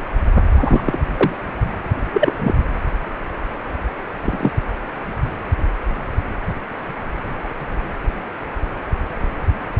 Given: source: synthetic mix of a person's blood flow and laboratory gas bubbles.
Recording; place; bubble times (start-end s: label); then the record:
Doppler ultrasound of blood flow; precordium
0.52-0.99 s: bubbles
1.20-1.35 s: bubbles
2.13-2.33 s: bubbles
2.39-2.55 s: bubbles
4.25-4.51 s: bubbles
From the record:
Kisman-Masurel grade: 123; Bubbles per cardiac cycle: 1 to 2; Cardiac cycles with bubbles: 10 to 50%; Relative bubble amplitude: loud (0.450 to 0.775); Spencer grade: 2 (many but less than half of the cardiac periods contain bubble signals, singularly or in groups); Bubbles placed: anywhere in the cardiac cycle